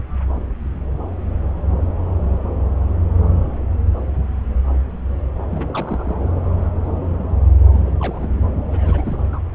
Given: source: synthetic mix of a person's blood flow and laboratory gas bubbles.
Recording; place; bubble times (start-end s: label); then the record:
Doppler ultrasound of blood flow; subclavian vein
0.35-0.41 s: bubbles
5.50-6.15 s: bubbles
7.72-7.91 s: bubbles
8.00-8.29 s: bubbles
8.41-8.44 s: bubbles
8.69-9.18 s: bubbles
9.32-9.40 s: bubbles
From the record:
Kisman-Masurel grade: 221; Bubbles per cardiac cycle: several, 3 to 8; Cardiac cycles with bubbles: 10 to 50%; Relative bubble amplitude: barely perceptible (0.100 to 0.250); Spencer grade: 2 (many but less than half of the cardiac periods contain bubble signals, singularly or in groups); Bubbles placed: anywhere in the cardiac cycle